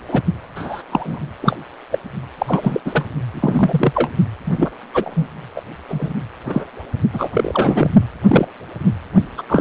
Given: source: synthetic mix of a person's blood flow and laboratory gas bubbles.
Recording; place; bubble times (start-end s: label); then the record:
Doppler ultrasound of blood flow; precordium
0.08-0.22 s: bubbles
0.55-0.82 s: bubbles
0.91-1.20 s: bubbles
1.41-1.58 s: bubbles
1.92-1.99 s: bubbles
2.38-2.80 s: bubbles
2.85-3.05 s: bubbles
3.34-4.10 s: bubbles
4.45-4.71 s: bubbles
4.94-5.28 s: bubbles
5.56-5.62 s: bubbles
5.89-6.13 s: bubbles
6.46-6.64 s: bubbles
7.12-7.30 s: bubbles
7.33-7.92 s: bubbles
8.28-8.48 s: bubbles
9.37-9.43 s: bubbles
9.48-9.61 s: bubbles
From the record:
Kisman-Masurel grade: 243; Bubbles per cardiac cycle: several, 3 to 8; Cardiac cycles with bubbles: 100%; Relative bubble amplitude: loud (0.450 to 0.775); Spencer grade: 3 (all of the cardiac periods contain showers or single bubble signals, but not dominating or overriding the cardiac motion signals); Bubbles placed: only in the low amplitude regions of the cardiac cycle